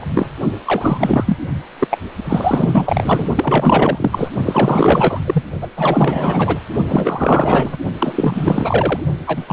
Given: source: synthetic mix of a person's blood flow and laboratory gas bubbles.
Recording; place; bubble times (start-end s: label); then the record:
Doppler ultrasound of blood flow; precordium
0.00-0.07 s: bubbles
0.15-0.29 s: bubbles
0.66-1.37 s: bubbles
1.80-1.88 s: bubbles
1.91-1.97 s: bubbles
2.24-3.26 s: bubbles
3.35-4.31 s: bubbles
4.45-5.20 s: bubbles
5.25-5.43 s: bubbles
5.61-5.68 s: bubbles
5.76-6.59 s: bubbles
6.88-7.77 s: bubbles
7.98-9.00 s: bubbles
9.26-9.53 s: bubbles
From the record:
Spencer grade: 4 (maximum detectable bubble signal sounding continuously throughout systole and diastole of every cardiac period, and overriding the amplitude of the normal cardiac signals); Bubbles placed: only in the low amplitude regions of the cardiac cycle